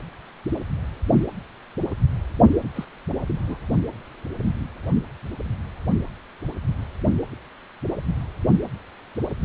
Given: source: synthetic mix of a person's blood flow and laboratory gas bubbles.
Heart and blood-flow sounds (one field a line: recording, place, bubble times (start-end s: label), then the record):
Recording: Doppler ultrasound of blood flow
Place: precordium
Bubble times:
2.74-2.85 s: bubbles
3.28-3.33 s: bubbles
3.36-3.66 s: bubbles
From the record:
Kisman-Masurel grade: 111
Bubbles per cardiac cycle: 1 to 2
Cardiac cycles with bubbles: 1 to 10%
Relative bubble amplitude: barely perceptible (0.100 to 0.250)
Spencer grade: 1 (occasional bubble signal discernible with the cardiac motion signal, with majority of cardiac periods free of bubbles)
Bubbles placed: only in the low amplitude regions of the cardiac cycle